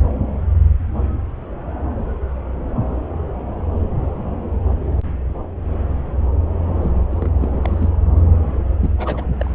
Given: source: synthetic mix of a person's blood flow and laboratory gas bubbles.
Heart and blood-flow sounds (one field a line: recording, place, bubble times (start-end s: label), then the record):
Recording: Doppler ultrasound of blood flow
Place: subclavian vein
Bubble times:
6.81-6.92 s: bubbles
7.11-7.31 s: bubbles
7.39-7.90 s: bubbles
8.80-8.93 s: bubbles
8.99-9.25 s: bubbles
9.38-9.55 s: bubbles
From the record:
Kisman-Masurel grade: 221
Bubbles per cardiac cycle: several, 3 to 8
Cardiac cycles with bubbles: 10 to 50%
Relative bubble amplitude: barely perceptible (0.100 to 0.250)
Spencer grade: 2 (many but less than half of the cardiac periods contain bubble signals, singularly or in groups)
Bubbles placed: anywhere in the cardiac cycle